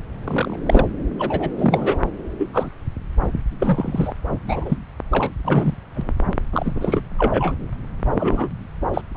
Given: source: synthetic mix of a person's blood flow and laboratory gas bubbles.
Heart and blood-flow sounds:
Doppler ultrasound of blood flow; subclavian vein
0.24-0.59 s: bubbles
0.68-0.88 s: bubbles
1.19-1.50 s: bubbles
1.57-2.00 s: bubbles
2.38-2.48 s: bubbles
2.53-2.69 s: bubbles
3.59-4.13 s: bubbles
4.47-4.78 s: bubbles
5.11-5.31 s: bubbles
5.45-5.75 s: bubbles
5.95-6.12 s: bubbles
6.52-7.01 s: bubbles
7.17-7.53 s: bubbles
8.14-8.48 s: bubbles
8.94-9.02 s: bubbles
9.14-9.17 s: bubbles
From the record:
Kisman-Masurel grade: 242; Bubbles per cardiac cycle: several, 3 to 8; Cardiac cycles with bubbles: 100%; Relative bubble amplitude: moderate (0.250 to 0.450); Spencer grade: 3 (all of the cardiac periods contain showers or single bubble signals, but not dominating or overriding the cardiac motion signals); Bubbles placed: anywhere in the cardiac cycle

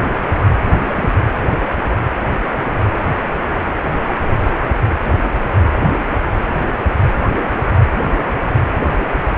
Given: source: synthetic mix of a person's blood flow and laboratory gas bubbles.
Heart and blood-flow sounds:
Doppler ultrasound of blood flow; precordium
0.87-0.93 s: bubbles
0.95-1.09 s: bubbles
From the record:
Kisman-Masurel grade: 112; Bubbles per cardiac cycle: 1 to 2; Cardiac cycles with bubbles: 1 to 10%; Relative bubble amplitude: moderate (0.250 to 0.450); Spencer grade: 1 (occasional bubble signal discernible with the cardiac motion signal, with majority of cardiac periods free of bubbles); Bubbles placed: anywhere in the cardiac cycle

